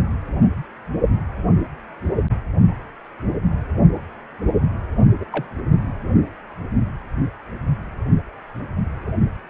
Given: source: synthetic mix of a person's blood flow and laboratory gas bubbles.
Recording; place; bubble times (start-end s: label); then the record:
Doppler ultrasound of blood flow; precordium
5.19-5.25 s: bubbles
5.32-5.46 s: bubbles
From the record:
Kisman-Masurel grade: 111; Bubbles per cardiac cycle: 1 to 2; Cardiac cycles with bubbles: 1 to 10%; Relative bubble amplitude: barely perceptible (0.100 to 0.250); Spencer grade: 1 (occasional bubble signal discernible with the cardiac motion signal, with majority of cardiac periods free of bubbles); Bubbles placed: anywhere in the cardiac cycle